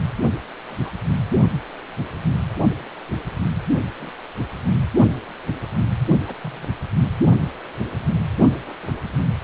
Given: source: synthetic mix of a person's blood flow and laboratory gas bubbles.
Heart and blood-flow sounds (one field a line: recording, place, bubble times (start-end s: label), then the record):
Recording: Doppler ultrasound of blood flow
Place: precordium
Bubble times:
0.70-0.92 s: bubbles
3.96-4.11 s: bubbles
6.27-6.35 s: bubbles
6.42-6.69 s: bubbles
8.65-8.77 s: bubbles
8.79-9.04 s: bubbles
From the record:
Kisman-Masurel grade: 121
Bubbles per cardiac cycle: 1 to 2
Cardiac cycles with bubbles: 10 to 50%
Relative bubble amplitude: barely perceptible (0.100 to 0.250)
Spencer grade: 2 (many but less than half of the cardiac periods contain bubble signals, singularly or in groups)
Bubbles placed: only in the low amplitude regions of the cardiac cycle